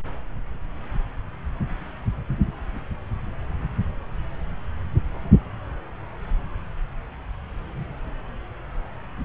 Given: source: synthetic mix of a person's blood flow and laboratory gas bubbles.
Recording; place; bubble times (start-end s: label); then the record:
Doppler ultrasound of blood flow; subclavian vein
no bubbles
From the record:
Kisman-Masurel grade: 000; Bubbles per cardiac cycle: 0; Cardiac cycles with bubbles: 0%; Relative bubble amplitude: no bubbles discernible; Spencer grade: 0 (complete lack of bubble signals)